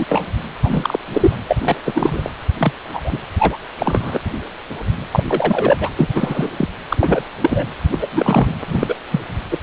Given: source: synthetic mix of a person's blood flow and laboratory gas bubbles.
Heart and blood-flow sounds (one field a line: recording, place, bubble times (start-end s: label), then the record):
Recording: Doppler ultrasound of blood flow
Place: precordium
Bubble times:
0.00-0.05 s: bubbles
0.09-0.28 s: bubbles
0.63-0.97 s: bubbles
1.12-1.37 s: bubbles
1.48-1.76 s: bubbles
1.85-2.30 s: bubbles
2.58-2.73 s: bubbles
2.94-3.18 s: bubbles
3.39-3.58 s: bubbles
3.78-4.20 s: bubbles
5.11-5.24 s: bubbles
5.27-5.77 s: bubbles
5.80-5.91 s: bubbles
5.99-6.50 s: bubbles
6.58-6.69 s: bubbles
6.90-7.25 s: bubbles
7.41-7.67 s: bubbles
7.91-8.07 s: bubbles
8.12-8.53 s: bubbles
8.67-8.96 s: bubbles
9.11-9.21 s: bubbles
9.51-9.58 s: bubbles
From the record:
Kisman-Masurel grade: 233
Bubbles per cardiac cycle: several, 3 to 8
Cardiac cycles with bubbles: 50 to 99%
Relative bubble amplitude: loud (0.450 to 0.775)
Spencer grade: 3 (all of the cardiac periods contain showers or single bubble signals, but not dominating or overriding the cardiac motion signals)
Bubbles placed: anywhere in the cardiac cycle